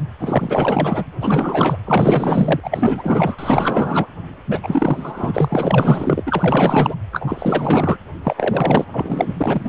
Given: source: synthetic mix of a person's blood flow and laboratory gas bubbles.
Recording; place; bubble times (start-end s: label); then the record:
Doppler ultrasound of blood flow; precordium
0.19-1.06 s: bubbles
1.20-1.77 s: bubbles
1.85-3.36 s: bubbles
3.38-4.07 s: bubbles
4.49-4.59 s: bubbles
4.62-6.23 s: bubbles
6.26-6.95 s: bubbles
7.12-7.98 s: bubbles
8.23-8.85 s: bubbles
8.92-9.34 s: bubbles
9.37-9.69 s: bubbles
From the record:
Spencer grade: 4 (maximum detectable bubble signal sounding continuously throughout systole and diastole of every cardiac period, and overriding the amplitude of the normal cardiac signals); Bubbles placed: anywhere in the cardiac cycle